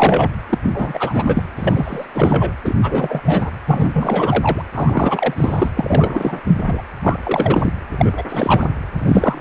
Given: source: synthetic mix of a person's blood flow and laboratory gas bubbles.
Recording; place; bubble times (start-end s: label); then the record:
Doppler ultrasound of blood flow; precordium
0.00-0.30 s: bubbles
0.49-0.59 s: bubbles
0.63-1.43 s: bubbles
1.56-2.06 s: bubbles
2.14-2.53 s: bubbles
2.65-2.75 s: bubbles
2.82-3.50 s: bubbles
3.66-4.63 s: bubbles
4.74-5.70 s: bubbles
5.77-6.41 s: bubbles
6.44-6.82 s: bubbles
7.03-7.19 s: bubbles
7.23-7.73 s: bubbles
7.92-8.23 s: bubbles
8.29-8.66 s: bubbles
8.98-9.41 s: bubbles
From the record:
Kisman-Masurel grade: 343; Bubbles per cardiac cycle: rolling drumbeat, 9 or more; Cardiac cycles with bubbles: 100%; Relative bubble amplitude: loud (0.450 to 0.775); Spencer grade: 3 (all of the cardiac periods contain showers or single bubble signals, but not dominating or overriding the cardiac motion signals); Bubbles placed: anywhere in the cardiac cycle